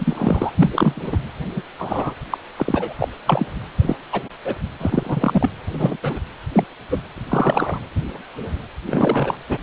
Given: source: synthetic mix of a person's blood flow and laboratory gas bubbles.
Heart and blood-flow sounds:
Doppler ultrasound of blood flow; precordium
0.00-0.52 s: bubbles
0.56-1.18 s: bubbles
1.55-1.62 s: bubbles
1.79-2.14 s: bubbles
2.30-2.38 s: bubbles
2.56-2.93 s: bubbles
2.98-3.08 s: bubbles
3.25-3.46 s: bubbles
3.81-3.96 s: bubbles
4.12-4.21 s: bubbles
4.45-4.55 s: bubbles
4.80-5.50 s: bubbles
5.73-5.97 s: bubbles
6.02-6.19 s: bubbles
6.52-6.64 s: bubbles
6.91-7.02 s: bubbles
7.17-7.20 s: bubbles
7.28-7.79 s: bubbles
8.86-9.38 s: bubbles
9.49-9.58 s: bubbles
From the record:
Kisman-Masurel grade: 233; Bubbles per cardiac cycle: several, 3 to 8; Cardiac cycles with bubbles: 50 to 99%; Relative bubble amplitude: loud (0.450 to 0.775); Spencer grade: 3 (all of the cardiac periods contain showers or single bubble signals, but not dominating or overriding the cardiac motion signals); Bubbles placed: anywhere in the cardiac cycle

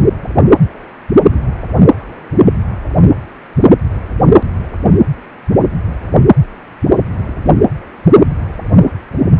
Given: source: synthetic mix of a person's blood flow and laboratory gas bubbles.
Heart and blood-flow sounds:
Doppler ultrasound of blood flow; precordium
7.17-7.22 s: bubbles
7.26-7.33 s: bubbles
From the record:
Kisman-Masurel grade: 111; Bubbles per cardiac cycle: 1 to 2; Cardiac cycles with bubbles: 1 to 10%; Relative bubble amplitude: barely perceptible (0.100 to 0.250); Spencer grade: 1 (occasional bubble signal discernible with the cardiac motion signal, with majority of cardiac periods free of bubbles); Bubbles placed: anywhere in the cardiac cycle

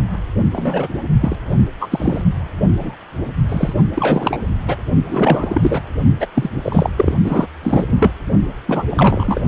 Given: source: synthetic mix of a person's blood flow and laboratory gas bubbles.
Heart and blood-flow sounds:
Doppler ultrasound of blood flow; precordium
0.53-0.88 s: bubbles
1.20-1.36 s: bubbles
1.79-2.23 s: bubbles
2.79-2.95 s: bubbles
3.49-3.73 s: bubbles
3.95-4.39 s: bubbles
4.67-4.76 s: bubbles
5.09-5.81 s: bubbles
6.20-6.27 s: bubbles
6.34-6.50 s: bubbles
6.61-6.90 s: bubbles
6.96-7.13 s: bubbles
7.23-7.47 s: bubbles
7.62-7.85 s: bubbles
7.88-8.11 s: bubbles
8.67-8.83 s: bubbles
8.90-9.41 s: bubbles
From the record:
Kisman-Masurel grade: 243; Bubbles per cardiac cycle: several, 3 to 8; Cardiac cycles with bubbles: 100%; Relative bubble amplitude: loud (0.450 to 0.775); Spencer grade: 3 (all of the cardiac periods contain showers or single bubble signals, but not dominating or overriding the cardiac motion signals); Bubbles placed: only in the low amplitude regions of the cardiac cycle

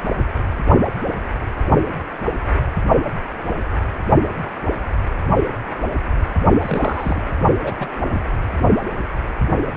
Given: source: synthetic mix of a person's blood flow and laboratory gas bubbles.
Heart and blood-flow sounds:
Doppler ultrasound of blood flow; precordium
6.62-7.20 s: bubbles
7.63-7.75 s: bubbles
7.78-8.22 s: bubbles
From the record:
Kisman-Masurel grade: 221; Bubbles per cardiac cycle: several, 3 to 8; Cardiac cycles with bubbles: 10 to 50%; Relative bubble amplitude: barely perceptible (0.100 to 0.250); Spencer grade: 2 (many but less than half of the cardiac periods contain bubble signals, singularly or in groups); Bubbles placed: only in the low amplitude regions of the cardiac cycle

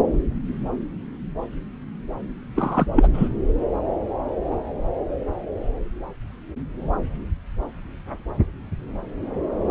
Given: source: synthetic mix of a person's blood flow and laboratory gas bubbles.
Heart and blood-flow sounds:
Doppler ultrasound of blood flow; subclavian vein
2.55-2.86 s: bubbles
2.95-3.08 s: bubbles
3.14-3.29 s: bubbles
From the record:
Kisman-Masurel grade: 223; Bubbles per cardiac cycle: several, 3 to 8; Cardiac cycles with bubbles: 10 to 50%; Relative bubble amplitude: loud (0.450 to 0.775); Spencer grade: 2 (many but less than half of the cardiac periods contain bubble signals, singularly or in groups); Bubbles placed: anywhere in the cardiac cycle

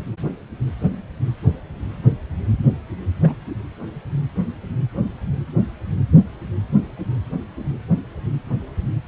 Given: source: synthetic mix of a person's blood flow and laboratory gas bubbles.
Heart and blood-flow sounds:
Doppler ultrasound of blood flow; precordium
3.23-3.33 s: bubbles
From the record:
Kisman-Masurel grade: 111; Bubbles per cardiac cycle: 1 to 2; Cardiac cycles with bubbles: 1 to 10%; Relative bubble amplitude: barely perceptible (0.100 to 0.250); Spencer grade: 1 (occasional bubble signal discernible with the cardiac motion signal, with majority of cardiac periods free of bubbles); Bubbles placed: anywhere in the cardiac cycle

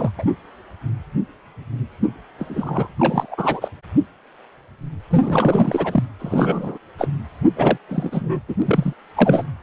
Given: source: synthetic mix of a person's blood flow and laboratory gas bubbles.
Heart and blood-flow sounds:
Doppler ultrasound of blood flow; precordium
0.00-0.11 s: bubbles
0.17-0.25 s: bubbles
2.38-2.88 s: bubbles
2.98-3.69 s: bubbles
5.10-6.04 s: bubbles
6.19-6.78 s: bubbles
6.98-7.08 s: bubbles
7.56-7.78 s: bubbles
7.88-8.39 s: bubbles
8.48-8.55 s: bubbles
8.62-8.93 s: bubbles
9.15-9.46 s: bubbles
From the record:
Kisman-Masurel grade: 333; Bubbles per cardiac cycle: rolling drumbeat, 9 or more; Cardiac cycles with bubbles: 50 to 99%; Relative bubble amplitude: loud (0.450 to 0.775); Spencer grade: 3 (all of the cardiac periods contain showers or single bubble signals, but not dominating or overriding the cardiac motion signals); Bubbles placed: anywhere in the cardiac cycle

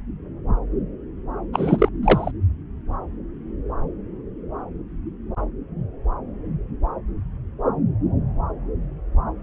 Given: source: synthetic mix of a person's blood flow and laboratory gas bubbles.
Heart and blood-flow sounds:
Doppler ultrasound of blood flow; subclavian vein
1.53-1.89 s: bubbles
2.02-2.31 s: bubbles
From the record:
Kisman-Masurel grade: 223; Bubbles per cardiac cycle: several, 3 to 8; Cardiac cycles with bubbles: 10 to 50%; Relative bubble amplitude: loud (0.450 to 0.775); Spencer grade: 2 (many but less than half of the cardiac periods contain bubble signals, singularly or in groups); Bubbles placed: anywhere in the cardiac cycle

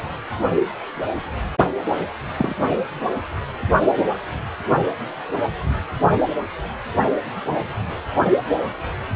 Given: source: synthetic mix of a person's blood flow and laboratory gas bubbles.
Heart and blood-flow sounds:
Doppler ultrasound of blood flow; precordium
2.38-2.55 s: bubbles
From the record:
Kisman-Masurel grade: 122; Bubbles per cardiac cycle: 1 to 2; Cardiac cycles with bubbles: 10 to 50%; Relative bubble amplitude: moderate (0.250 to 0.450); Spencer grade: 2 (many but less than half of the cardiac periods contain bubble signals, singularly or in groups); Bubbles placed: only in the low amplitude regions of the cardiac cycle

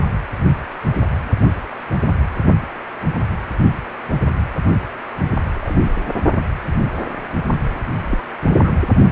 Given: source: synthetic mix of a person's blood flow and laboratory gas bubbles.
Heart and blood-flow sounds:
Doppler ultrasound of blood flow; precordium
5.55-6.00 s: bubbles
8.04-8.24 s: bubbles
8.46-8.72 s: bubbles
From the record:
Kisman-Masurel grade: 122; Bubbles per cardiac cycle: 1 to 2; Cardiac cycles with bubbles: 10 to 50%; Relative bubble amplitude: moderate (0.250 to 0.450); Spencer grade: 2 (many but less than half of the cardiac periods contain bubble signals, singularly or in groups); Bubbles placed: only in the low amplitude regions of the cardiac cycle

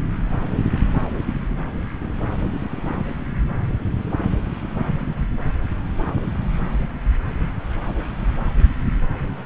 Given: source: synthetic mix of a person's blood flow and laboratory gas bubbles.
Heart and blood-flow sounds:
Doppler ultrasound of blood flow; subclavian vein
0.40-0.55 s: bubbles
From the record:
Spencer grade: 1 (occasional bubble signal discernible with the cardiac motion signal, with majority of cardiac periods free of bubbles); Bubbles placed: anywhere in the cardiac cycle

